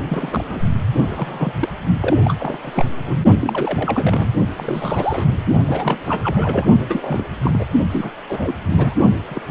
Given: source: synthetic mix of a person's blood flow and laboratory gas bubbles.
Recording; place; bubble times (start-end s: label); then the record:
Doppler ultrasound of blood flow; precordium
0.09-0.44 s: bubbles
0.48-0.67 s: bubbles
1.01-1.53 s: bubbles
1.59-1.69 s: bubbles
2.00-2.17 s: bubbles
2.23-2.35 s: bubbles
2.39-2.58 s: bubbles
2.64-2.85 s: bubbles
3.06-3.19 s: bubbles
3.40-4.31 s: bubbles
4.57-5.43 s: bubbles
5.65-6.68 s: bubbles
6.79-7.25 s: bubbles
7.44-7.66 s: bubbles
7.91-8.11 s: bubbles
8.28-8.55 s: bubbles
8.70-8.94 s: bubbles
9.29-9.42 s: bubbles
From the record:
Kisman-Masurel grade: 342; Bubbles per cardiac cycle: rolling drumbeat, 9 or more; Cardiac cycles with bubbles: 100%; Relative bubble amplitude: moderate (0.250 to 0.450); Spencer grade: 3 (all of the cardiac periods contain showers or single bubble signals, but not dominating or overriding the cardiac motion signals); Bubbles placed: only in the low amplitude regions of the cardiac cycle